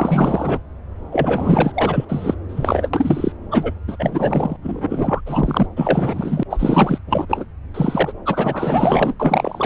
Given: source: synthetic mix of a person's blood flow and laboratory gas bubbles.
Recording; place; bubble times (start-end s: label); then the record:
Doppler ultrasound of blood flow; subclavian vein
0.00-0.60 s: bubbles
1.11-2.05 s: bubbles
2.08-2.35 s: bubbles
2.48-2.89 s: bubbles
2.93-3.32 s: bubbles
3.51-3.73 s: bubbles
3.88-3.97 s: bubbles
3.99-4.57 s: bubbles
4.62-5.21 s: bubbles
5.26-5.67 s: bubbles
5.76-6.44 s: bubbles
6.50-6.98 s: bubbles
7.07-7.26 s: bubbles
7.29-7.45 s: bubbles
7.74-8.12 s: bubbles
8.25-9.14 s: bubbles
9.20-9.66 s: bubbles
From the record:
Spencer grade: 4 (maximum detectable bubble signal sounding continuously throughout systole and diastole of every cardiac period, and overriding the amplitude of the normal cardiac signals); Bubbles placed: anywhere in the cardiac cycle